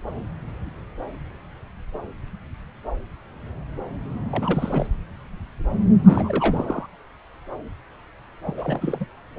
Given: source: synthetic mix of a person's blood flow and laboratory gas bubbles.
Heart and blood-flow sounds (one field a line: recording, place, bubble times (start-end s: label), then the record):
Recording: Doppler ultrasound of blood flow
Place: subclavian vein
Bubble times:
4.30-4.87 s: bubbles
6.04-6.86 s: bubbles
8.46-8.53 s: bubbles
8.57-9.05 s: bubbles
From the record:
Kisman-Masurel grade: 221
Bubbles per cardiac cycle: several, 3 to 8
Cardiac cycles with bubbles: 10 to 50%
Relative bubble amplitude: barely perceptible (0.100 to 0.250)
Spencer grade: 2 (many but less than half of the cardiac periods contain bubble signals, singularly or in groups)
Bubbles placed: anywhere in the cardiac cycle